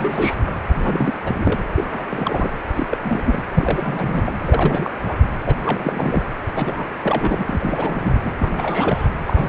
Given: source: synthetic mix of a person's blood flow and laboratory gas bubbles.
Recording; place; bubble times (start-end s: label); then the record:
Doppler ultrasound of blood flow; precordium
0.00-0.36 s: bubbles
0.46-0.53 s: bubbles
0.68-1.14 s: bubbles
1.24-1.68 s: bubbles
1.77-1.86 s: bubbles
1.92-2.04 s: bubbles
2.10-2.49 s: bubbles
2.73-2.98 s: bubbles
3.04-3.42 s: bubbles
3.54-4.38 s: bubbles
4.43-4.92 s: bubbles
5.05-5.17 s: bubbles
5.46-5.55 s: bubbles
5.63-6.22 s: bubbles
6.55-6.86 s: bubbles
7.03-8.31 s: bubbles
8.38-9.08 s: bubbles
9.26-9.49 s: bubbles
From the record:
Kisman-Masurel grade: 332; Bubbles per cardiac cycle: rolling drumbeat, 9 or more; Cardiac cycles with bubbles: 50 to 99%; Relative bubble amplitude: moderate (0.250 to 0.450); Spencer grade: 3 (all of the cardiac periods contain showers or single bubble signals, but not dominating or overriding the cardiac motion signals); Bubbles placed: anywhere in the cardiac cycle